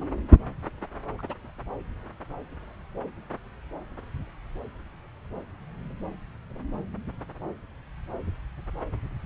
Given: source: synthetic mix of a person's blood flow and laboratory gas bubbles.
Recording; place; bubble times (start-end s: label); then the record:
Doppler ultrasound of blood flow; subclavian vein
1.19-1.23 s: bubbles
1.29-1.33 s: bubbles
From the record:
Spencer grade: 2 (many but less than half of the cardiac periods contain bubble signals, singularly or in groups); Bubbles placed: anywhere in the cardiac cycle